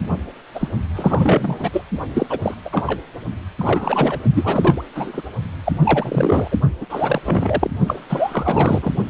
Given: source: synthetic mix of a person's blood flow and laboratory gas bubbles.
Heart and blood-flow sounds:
Doppler ultrasound of blood flow; precordium
0.00-0.03 s: bubbles
0.54-0.68 s: bubbles
0.95-1.69 s: bubbles
1.73-1.83 s: bubbles
2.14-2.26 s: bubbles
2.29-2.39 s: bubbles
2.42-2.54 s: bubbles
2.65-2.83 s: bubbles
2.87-2.99 s: bubbles
3.59-4.19 s: bubbles
4.34-4.81 s: bubbles
4.95-5.22 s: bubbles
5.65-5.72 s: bubbles
5.83-6.48 s: bubbles
6.51-6.56 s: bubbles
6.80-6.85 s: bubbles
6.89-7.21 s: bubbles
7.25-7.70 s: bubbles
7.87-8.00 s: bubbles
8.10-8.92 s: bubbles
From the record:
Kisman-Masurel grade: 342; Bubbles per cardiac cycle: rolling drumbeat, 9 or more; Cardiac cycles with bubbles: 100%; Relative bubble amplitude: moderate (0.250 to 0.450); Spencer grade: 3 (all of the cardiac periods contain showers or single bubble signals, but not dominating or overriding the cardiac motion signals); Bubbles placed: only in the low amplitude regions of the cardiac cycle

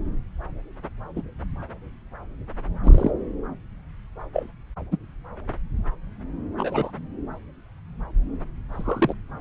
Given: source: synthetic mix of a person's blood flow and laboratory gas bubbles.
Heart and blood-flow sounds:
Doppler ultrasound of blood flow; subclavian vein
1.16-1.22 s: bubbles
2.83-3.10 s: bubbles
4.33-4.46 s: bubbles
4.92-4.97 s: bubbles
6.58-6.91 s: bubbles
8.72-9.14 s: bubbles
From the record:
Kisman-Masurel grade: 122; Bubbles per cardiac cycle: 1 to 2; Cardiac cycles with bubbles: 10 to 50%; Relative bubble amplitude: moderate (0.250 to 0.450); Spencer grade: 2 (many but less than half of the cardiac periods contain bubble signals, singularly or in groups); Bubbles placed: anywhere in the cardiac cycle

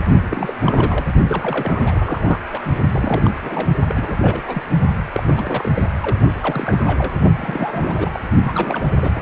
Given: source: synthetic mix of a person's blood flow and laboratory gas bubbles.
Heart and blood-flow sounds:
Doppler ultrasound of blood flow; precordium
0.25-1.05 s: bubbles
1.29-2.39 s: bubbles
2.51-2.61 s: bubbles
2.92-3.30 s: bubbles
3.42-3.76 s: bubbles
3.88-4.16 s: bubbles
4.19-4.62 s: bubbles
5.12-5.22 s: bubbles
5.26-5.71 s: bubbles
5.75-5.88 s: bubbles
6.02-6.20 s: bubbles
6.40-7.14 s: bubbles
7.38-8.10 s: bubbles
8.13-8.19 s: bubbles
8.43-9.22 s: bubbles
From the record:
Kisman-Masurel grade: 342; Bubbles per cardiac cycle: rolling drumbeat, 9 or more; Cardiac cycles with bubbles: 100%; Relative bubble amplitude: moderate (0.250 to 0.450); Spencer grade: 3 (all of the cardiac periods contain showers or single bubble signals, but not dominating or overriding the cardiac motion signals); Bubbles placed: only in the low amplitude regions of the cardiac cycle

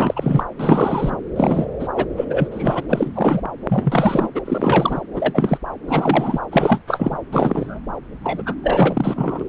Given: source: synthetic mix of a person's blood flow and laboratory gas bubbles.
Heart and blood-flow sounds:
Doppler ultrasound of blood flow; subclavian vein
0.00-0.43 s: bubbles
0.58-1.16 s: bubbles
1.36-1.67 s: bubbles
1.79-1.88 s: bubbles
1.95-2.06 s: bubbles
2.16-2.25 s: bubbles
2.29-2.48 s: bubbles
2.51-2.83 s: bubbles
2.88-3.41 s: bubbles
3.69-4.30 s: bubbles
4.35-4.42 s: bubbles
4.45-5.01 s: bubbles
5.14-5.58 s: bubbles
5.87-6.39 s: bubbles
6.51-6.79 s: bubbles
6.87-7.19 s: bubbles
7.32-7.80 s: bubbles
8.23-8.43 s: bubbles
8.46-8.55 s: bubbles
8.63-9.44 s: bubbles
From the record:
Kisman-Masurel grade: 343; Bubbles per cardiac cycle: rolling drumbeat, 9 or more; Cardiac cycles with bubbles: 100%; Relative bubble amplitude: loud (0.450 to 0.775); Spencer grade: 3 (all of the cardiac periods contain showers or single bubble signals, but not dominating or overriding the cardiac motion signals); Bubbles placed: anywhere in the cardiac cycle

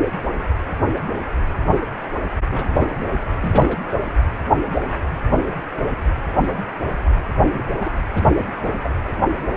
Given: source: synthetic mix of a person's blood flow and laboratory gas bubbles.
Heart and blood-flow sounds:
Doppler ultrasound of blood flow; precordium
2.50-2.86 s: bubbles
3.00-3.06 s: bubbles
3.40-3.77 s: bubbles
4.04-4.12 s: bubbles
7.53-7.63 s: bubbles
7.72-7.91 s: bubbles
8.13-8.24 s: bubbles
8.29-8.46 s: bubbles
8.83-8.89 s: bubbles
From the record:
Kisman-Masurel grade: 221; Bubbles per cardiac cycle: several, 3 to 8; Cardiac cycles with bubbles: 10 to 50%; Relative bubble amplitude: barely perceptible (0.100 to 0.250); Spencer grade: 2 (many but less than half of the cardiac periods contain bubble signals, singularly or in groups); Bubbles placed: anywhere in the cardiac cycle

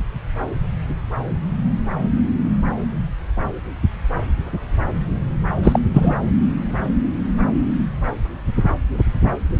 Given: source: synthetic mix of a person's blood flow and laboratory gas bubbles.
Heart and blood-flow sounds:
Doppler ultrasound of blood flow; subclavian vein
5.63-5.79 s: bubbles
5.93-6.16 s: bubbles
From the record:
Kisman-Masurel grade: 213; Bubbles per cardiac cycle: several, 3 to 8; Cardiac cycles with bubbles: 1 to 10%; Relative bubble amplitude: loud (0.450 to 0.775); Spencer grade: 1 (occasional bubble signal discernible with the cardiac motion signal, with majority of cardiac periods free of bubbles); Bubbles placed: anywhere in the cardiac cycle

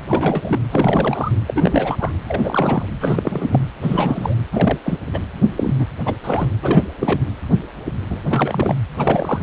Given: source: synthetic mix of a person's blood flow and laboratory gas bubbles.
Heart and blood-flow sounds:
Doppler ultrasound of blood flow; precordium
0.08-0.59 s: bubbles
0.71-1.32 s: bubbles
1.46-1.97 s: bubbles
1.99-2.12 s: bubbles
2.25-2.85 s: bubbles
3.00-3.60 s: bubbles
3.81-4.35 s: bubbles
4.51-4.78 s: bubbles
4.83-4.99 s: bubbles
5.13-5.19 s: bubbles
5.56-5.74 s: bubbles
5.79-5.85 s: bubbles
6.05-6.14 s: bubbles
6.23-6.49 s: bubbles
6.61-6.83 s: bubbles
6.99-7.21 s: bubbles
8.10-8.21 s: bubbles
8.23-8.75 s: bubbles
8.97-9.43 s: bubbles
From the record:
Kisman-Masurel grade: 332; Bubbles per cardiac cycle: rolling drumbeat, 9 or more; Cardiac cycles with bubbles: 50 to 99%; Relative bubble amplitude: moderate (0.250 to 0.450); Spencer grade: 3 (all of the cardiac periods contain showers or single bubble signals, but not dominating or overriding the cardiac motion signals); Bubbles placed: anywhere in the cardiac cycle

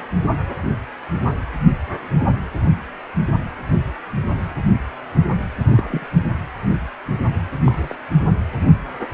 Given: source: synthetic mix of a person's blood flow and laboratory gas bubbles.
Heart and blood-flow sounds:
Doppler ultrasound of blood flow; precordium
5.70-6.06 s: bubbles
7.64-7.96 s: bubbles
From the record:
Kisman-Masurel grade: 122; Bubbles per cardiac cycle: 1 to 2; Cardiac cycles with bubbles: 10 to 50%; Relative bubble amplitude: moderate (0.250 to 0.450); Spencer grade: 2 (many but less than half of the cardiac periods contain bubble signals, singularly or in groups); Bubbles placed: anywhere in the cardiac cycle

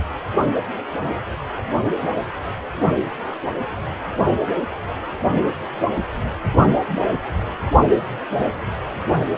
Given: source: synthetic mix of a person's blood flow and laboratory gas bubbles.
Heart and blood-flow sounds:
Doppler ultrasound of blood flow; precordium
7.63-7.71 s: bubbles
From the record:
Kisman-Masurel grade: 111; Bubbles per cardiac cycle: 1 to 2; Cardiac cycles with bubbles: 1 to 10%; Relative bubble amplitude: barely perceptible (0.100 to 0.250); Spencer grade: 1 (occasional bubble signal discernible with the cardiac motion signal, with majority of cardiac periods free of bubbles); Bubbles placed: anywhere in the cardiac cycle

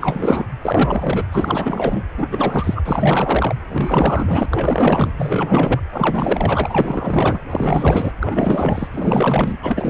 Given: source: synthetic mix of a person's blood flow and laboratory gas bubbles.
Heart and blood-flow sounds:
Doppler ultrasound of blood flow; precordium
0.00-0.46 s: bubbles
0.61-1.26 s: bubbles
1.32-2.03 s: bubbles
2.18-2.29 s: bubbles
2.31-2.83 s: bubbles
2.85-3.56 s: bubbles
3.70-4.46 s: bubbles
4.51-5.12 s: bubbles
5.17-5.82 s: bubbles
5.92-7.40 s: bubbles
7.50-8.15 s: bubbles
8.20-8.88 s: bubbles
8.92-9.57 s: bubbles
9.62-9.90 s: bubbles
From the record:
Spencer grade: 4 (maximum detectable bubble signal sounding continuously throughout systole and diastole of every cardiac period, and overriding the amplitude of the normal cardiac signals); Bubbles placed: anywhere in the cardiac cycle

